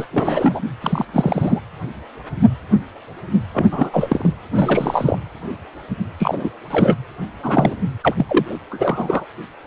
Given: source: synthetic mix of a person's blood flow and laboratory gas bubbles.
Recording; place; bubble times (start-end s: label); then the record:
Doppler ultrasound of blood flow; precordium
0.00-0.06 s: bubbles
0.11-0.60 s: bubbles
0.81-1.05 s: bubbles
1.13-1.60 s: bubbles
3.54-3.89 s: bubbles
3.92-4.29 s: bubbles
4.54-5.18 s: bubbles
6.18-6.49 s: bubbles
6.70-6.96 s: bubbles
7.42-7.75 s: bubbles
8.02-8.59 s: bubbles
8.71-9.25 s: bubbles
From the record:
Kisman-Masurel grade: 333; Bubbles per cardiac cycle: rolling drumbeat, 9 or more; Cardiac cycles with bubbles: 50 to 99%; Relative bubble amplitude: loud (0.450 to 0.775); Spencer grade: 3 (all of the cardiac periods contain showers or single bubble signals, but not dominating or overriding the cardiac motion signals); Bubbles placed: anywhere in the cardiac cycle